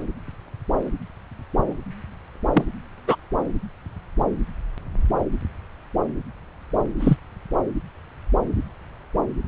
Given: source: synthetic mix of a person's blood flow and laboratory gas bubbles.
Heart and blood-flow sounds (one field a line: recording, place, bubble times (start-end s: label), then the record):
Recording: Doppler ultrasound of blood flow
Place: subclavian vein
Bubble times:
2.53-2.65 s: bubbles
3.07-3.17 s: bubbles
7.00-7.16 s: bubbles
From the record:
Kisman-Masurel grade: 122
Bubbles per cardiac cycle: 1 to 2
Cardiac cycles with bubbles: 10 to 50%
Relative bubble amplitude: moderate (0.250 to 0.450)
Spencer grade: 2 (many but less than half of the cardiac periods contain bubble signals, singularly or in groups)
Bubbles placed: anywhere in the cardiac cycle